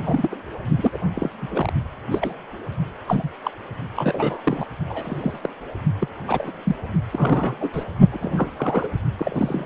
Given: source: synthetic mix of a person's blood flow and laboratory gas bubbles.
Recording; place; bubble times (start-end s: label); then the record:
Doppler ultrasound of blood flow; precordium
0.05-0.36 s: bubbles
0.77-0.98 s: bubbles
1.15-1.29 s: bubbles
1.42-1.47 s: bubbles
1.50-1.72 s: bubbles
2.11-2.34 s: bubbles
3.06-3.29 s: bubbles
3.43-3.50 s: bubbles
3.96-4.67 s: bubbles
4.86-5.38 s: bubbles
5.42-5.49 s: bubbles
5.99-6.08 s: bubbles
6.28-6.51 s: bubbles
6.64-6.75 s: bubbles
7.12-7.55 s: bubbles
7.60-7.70 s: bubbles
7.73-7.84 s: bubbles
8.11-8.89 s: bubbles
9.19-9.66 s: bubbles
From the record:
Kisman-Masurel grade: 242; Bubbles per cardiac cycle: several, 3 to 8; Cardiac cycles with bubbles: 100%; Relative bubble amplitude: moderate (0.250 to 0.450); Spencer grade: 3 (all of the cardiac periods contain showers or single bubble signals, but not dominating or overriding the cardiac motion signals); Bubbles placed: only in the low amplitude regions of the cardiac cycle